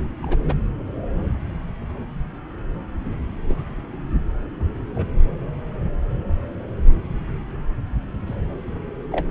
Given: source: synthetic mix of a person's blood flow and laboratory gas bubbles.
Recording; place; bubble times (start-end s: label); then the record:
Doppler ultrasound of blood flow; subclavian vein
0.23-0.38 s: bubbles
0.43-0.53 s: bubbles
3.48-3.56 s: bubbles
4.95-5.08 s: bubbles
8.26-8.34 s: bubbles
9.12-9.25 s: bubbles
From the record:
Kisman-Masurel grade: 121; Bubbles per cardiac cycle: 1 to 2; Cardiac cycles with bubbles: 10 to 50%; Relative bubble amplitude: barely perceptible (0.100 to 0.250); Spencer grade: 2 (many but less than half of the cardiac periods contain bubble signals, singularly or in groups); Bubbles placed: anywhere in the cardiac cycle